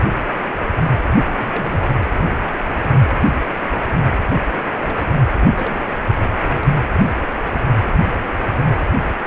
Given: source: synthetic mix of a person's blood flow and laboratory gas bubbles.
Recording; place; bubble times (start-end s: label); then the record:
Doppler ultrasound of blood flow; precordium
1.00-1.09 s: bubbles
1.23-1.91 s: bubbles
4.64-5.14 s: bubbles
5.35-5.48 s: bubbles
5.54-5.81 s: bubbles
6.09-6.14 s: bubbles
6.21-6.29 s: bubbles
From the record:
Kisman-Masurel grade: 221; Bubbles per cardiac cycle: several, 3 to 8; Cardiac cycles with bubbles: 10 to 50%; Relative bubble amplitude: barely perceptible (0.100 to 0.250); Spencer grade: 2 (many but less than half of the cardiac periods contain bubble signals, singularly or in groups); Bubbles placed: anywhere in the cardiac cycle